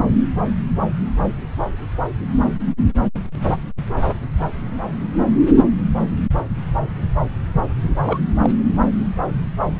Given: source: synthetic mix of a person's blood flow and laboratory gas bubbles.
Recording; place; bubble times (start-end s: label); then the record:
Doppler ultrasound of blood flow; subclavian vein
8.02-8.18 s: bubbles
8.43-8.49 s: bubbles
From the record:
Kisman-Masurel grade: 212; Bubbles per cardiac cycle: several, 3 to 8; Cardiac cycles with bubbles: 1 to 10%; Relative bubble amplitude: moderate (0.250 to 0.450); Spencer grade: 1 (occasional bubble signal discernible with the cardiac motion signal, with majority of cardiac periods free of bubbles); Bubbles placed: anywhere in the cardiac cycle